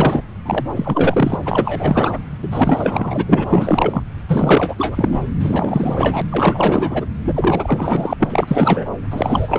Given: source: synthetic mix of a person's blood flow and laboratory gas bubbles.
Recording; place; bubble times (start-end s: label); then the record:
Doppler ultrasound of blood flow; subclavian vein
0.00-0.21 s: bubbles
0.45-0.66 s: bubbles
0.75-1.37 s: bubbles
1.45-2.18 s: bubbles
2.42-2.48 s: bubbles
2.51-3.46 s: bubbles
3.50-4.03 s: bubbles
4.28-5.29 s: bubbles
5.40-6.22 s: bubbles
6.29-7.06 s: bubbles
7.25-8.13 s: bubbles
8.20-8.86 s: bubbles
9.11-9.59 s: bubbles
From the record:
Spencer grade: 4 (maximum detectable bubble signal sounding continuously throughout systole and diastole of every cardiac period, and overriding the amplitude of the normal cardiac signals); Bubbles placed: anywhere in the cardiac cycle